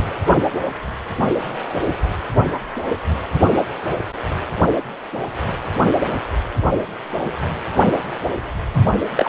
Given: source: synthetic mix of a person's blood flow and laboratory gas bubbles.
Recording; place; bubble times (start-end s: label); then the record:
Doppler ultrasound of blood flow; precordium
8.74-8.92 s: bubbles
9.17-9.29 s: bubbles
From the record:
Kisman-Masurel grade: 212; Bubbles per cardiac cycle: several, 3 to 8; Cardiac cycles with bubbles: 1 to 10%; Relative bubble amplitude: moderate (0.250 to 0.450); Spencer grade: 1 (occasional bubble signal discernible with the cardiac motion signal, with majority of cardiac periods free of bubbles); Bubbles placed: anywhere in the cardiac cycle